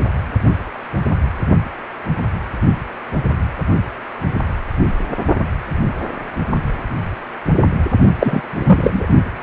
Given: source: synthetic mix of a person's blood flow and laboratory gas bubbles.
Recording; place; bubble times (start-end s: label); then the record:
Doppler ultrasound of blood flow; precordium
8.19-8.41 s: bubbles
8.55-9.06 s: bubbles
From the record:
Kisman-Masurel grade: 223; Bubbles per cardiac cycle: several, 3 to 8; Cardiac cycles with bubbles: 10 to 50%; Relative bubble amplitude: loud (0.450 to 0.775); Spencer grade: 2 (many but less than half of the cardiac periods contain bubble signals, singularly or in groups); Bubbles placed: only in the low amplitude regions of the cardiac cycle